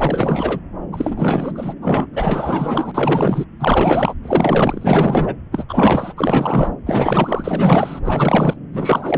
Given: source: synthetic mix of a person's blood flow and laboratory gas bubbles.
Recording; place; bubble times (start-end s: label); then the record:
Doppler ultrasound of blood flow; subclavian vein
0.00-0.60 s: bubbles
0.92-1.74 s: bubbles
1.81-2.06 s: bubbles
2.13-3.45 s: bubbles
3.59-4.14 s: bubbles
4.22-5.35 s: bubbles
5.52-5.64 s: bubbles
5.69-6.13 s: bubbles
6.17-6.71 s: bubbles
6.86-8.01 s: bubbles
8.05-8.56 s: bubbles
8.73-9.18 s: bubbles
From the record:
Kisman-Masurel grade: 444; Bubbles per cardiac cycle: continuous sound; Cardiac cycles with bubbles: 100%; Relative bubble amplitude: maximal (0.775 to 0.999); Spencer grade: 4 (maximum detectable bubble signal sounding continuously throughout systole and diastole of every cardiac period, and overriding the amplitude of the normal cardiac signals); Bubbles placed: anywhere in the cardiac cycle